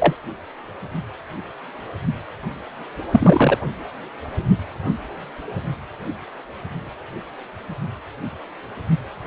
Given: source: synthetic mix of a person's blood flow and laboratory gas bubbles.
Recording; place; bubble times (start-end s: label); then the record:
Doppler ultrasound of blood flow; precordium
0.00-0.15 s: bubbles
3.12-3.58 s: bubbles
From the record:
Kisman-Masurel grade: 123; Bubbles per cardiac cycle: 1 to 2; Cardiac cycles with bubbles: 10 to 50%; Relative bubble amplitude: loud (0.450 to 0.775); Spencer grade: 2 (many but less than half of the cardiac periods contain bubble signals, singularly or in groups); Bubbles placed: anywhere in the cardiac cycle